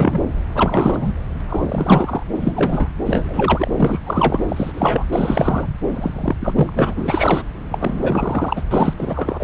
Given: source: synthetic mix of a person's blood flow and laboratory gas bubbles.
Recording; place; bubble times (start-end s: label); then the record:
Doppler ultrasound of blood flow; subclavian vein
0.00-0.20 s: bubbles
0.54-1.12 s: bubbles
1.48-2.23 s: bubbles
2.35-2.90 s: bubbles
3.06-3.71 s: bubbles
3.76-3.99 s: bubbles
4.06-4.40 s: bubbles
4.48-5.05 s: bubbles
5.11-5.69 s: bubbles
5.92-6.36 s: bubbles
6.40-6.94 s: bubbles
6.96-7.42 s: bubbles
7.71-8.63 s: bubbles
8.71-8.94 s: bubbles
8.98-9.44 s: bubbles
From the record:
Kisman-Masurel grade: 343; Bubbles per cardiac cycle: rolling drumbeat, 9 or more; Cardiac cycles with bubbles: 100%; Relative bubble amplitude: loud (0.450 to 0.775); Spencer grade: 3 (all of the cardiac periods contain showers or single bubble signals, but not dominating or overriding the cardiac motion signals); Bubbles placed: anywhere in the cardiac cycle